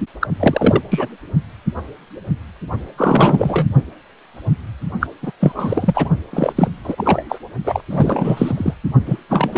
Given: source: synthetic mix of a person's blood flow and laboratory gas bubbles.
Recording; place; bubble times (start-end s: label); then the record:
Doppler ultrasound of blood flow; precordium
0.21-0.27 s: bubbles
0.39-0.81 s: bubbles
0.91-1.08 s: bubbles
2.97-3.67 s: bubbles
5.00-5.07 s: bubbles
5.22-5.31 s: bubbles
5.40-6.09 s: bubbles
6.33-6.53 s: bubbles
6.56-6.68 s: bubbles
6.84-7.23 s: bubbles
7.29-7.38 s: bubbles
7.64-7.81 s: bubbles
7.89-8.74 s: bubbles
9.05-9.19 s: bubbles
9.29-9.58 s: bubbles
From the record:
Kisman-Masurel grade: 333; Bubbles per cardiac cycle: rolling drumbeat, 9 or more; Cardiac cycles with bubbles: 50 to 99%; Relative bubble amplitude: loud (0.450 to 0.775); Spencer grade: 3 (all of the cardiac periods contain showers or single bubble signals, but not dominating or overriding the cardiac motion signals); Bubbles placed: only in the low amplitude regions of the cardiac cycle